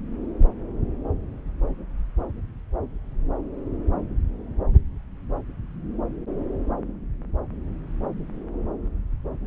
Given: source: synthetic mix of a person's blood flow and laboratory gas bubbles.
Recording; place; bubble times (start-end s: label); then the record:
Doppler ultrasound of blood flow; subclavian vein
no bubbles
From the record:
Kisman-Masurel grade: 000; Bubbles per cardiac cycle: 0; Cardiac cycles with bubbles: 0%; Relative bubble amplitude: no bubbles discernible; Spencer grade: 0 (complete lack of bubble signals)